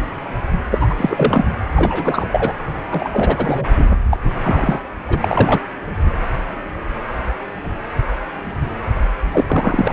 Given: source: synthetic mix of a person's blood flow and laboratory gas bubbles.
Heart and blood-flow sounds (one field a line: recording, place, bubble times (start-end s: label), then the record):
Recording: Doppler ultrasound of blood flow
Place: precordium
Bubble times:
0.71-0.95 s: bubbles
0.97-1.46 s: bubbles
1.76-2.27 s: bubbles
2.32-2.54 s: bubbles
2.91-3.67 s: bubbles
3.76-3.88 s: bubbles
4.11-4.18 s: bubbles
4.43-4.81 s: bubbles
5.08-5.60 s: bubbles
9.32-9.93 s: bubbles
From the record:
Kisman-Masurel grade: 333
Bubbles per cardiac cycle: rolling drumbeat, 9 or more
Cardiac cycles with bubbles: 50 to 99%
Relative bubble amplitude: loud (0.450 to 0.775)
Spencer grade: 3 (all of the cardiac periods contain showers or single bubble signals, but not dominating or overriding the cardiac motion signals)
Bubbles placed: anywhere in the cardiac cycle